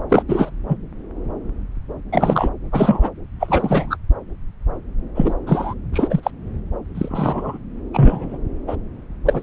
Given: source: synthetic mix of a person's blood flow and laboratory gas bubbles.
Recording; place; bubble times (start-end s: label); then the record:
Doppler ultrasound of blood flow; subclavian vein
0.09-0.23 s: bubbles
0.28-0.51 s: bubbles
0.68-0.77 s: bubbles
2.12-2.50 s: bubbles
2.72-3.10 s: bubbles
3.40-3.97 s: bubbles
5.15-5.36 s: bubbles
5.46-5.74 s: bubbles
5.93-6.20 s: bubbles
6.23-6.31 s: bubbles
6.94-7.58 s: bubbles
7.93-8.38 s: bubbles
8.67-8.76 s: bubbles
9.26-9.42 s: bubbles
From the record:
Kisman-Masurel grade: 233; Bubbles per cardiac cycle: several, 3 to 8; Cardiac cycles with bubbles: 50 to 99%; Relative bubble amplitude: loud (0.450 to 0.775); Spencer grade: 3 (all of the cardiac periods contain showers or single bubble signals, but not dominating or overriding the cardiac motion signals); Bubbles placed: anywhere in the cardiac cycle